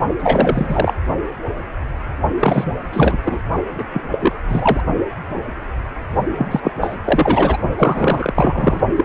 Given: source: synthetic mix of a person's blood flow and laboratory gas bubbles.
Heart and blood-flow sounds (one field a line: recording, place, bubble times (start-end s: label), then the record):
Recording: Doppler ultrasound of blood flow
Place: precordium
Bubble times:
0.19-0.94 s: bubbles
2.40-2.72 s: bubbles
2.92-3.18 s: bubbles
3.25-3.40 s: bubbles
3.75-3.85 s: bubbles
3.94-4.01 s: bubbles
4.11-4.33 s: bubbles
4.48-4.80 s: bubbles
6.36-6.71 s: bubbles
6.81-6.96 s: bubbles
7.04-7.57 s: bubbles
7.78-8.80 s: bubbles
8.97-9.05 s: bubbles
From the record:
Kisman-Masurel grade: 333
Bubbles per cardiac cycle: rolling drumbeat, 9 or more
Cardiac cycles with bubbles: 50 to 99%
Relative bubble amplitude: loud (0.450 to 0.775)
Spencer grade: 3 (all of the cardiac periods contain showers or single bubble signals, but not dominating or overriding the cardiac motion signals)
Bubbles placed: only in the low amplitude regions of the cardiac cycle